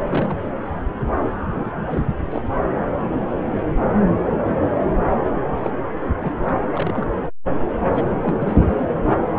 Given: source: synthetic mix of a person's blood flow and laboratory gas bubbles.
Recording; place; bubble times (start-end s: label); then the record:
Doppler ultrasound of blood flow; subclavian vein
0.08-0.40 s: bubbles
1.55-1.99 s: bubbles
2.30-2.42 s: bubbles
5.63-5.71 s: bubbles
6.21-6.55 s: bubbles
6.72-7.07 s: bubbles
7.94-8.04 s: bubbles
8.22-8.86 s: bubbles
From the record:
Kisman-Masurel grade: 222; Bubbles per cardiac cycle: several, 3 to 8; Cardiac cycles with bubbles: 10 to 50%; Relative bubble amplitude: moderate (0.250 to 0.450); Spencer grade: 2 (many but less than half of the cardiac periods contain bubble signals, singularly or in groups); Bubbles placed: anywhere in the cardiac cycle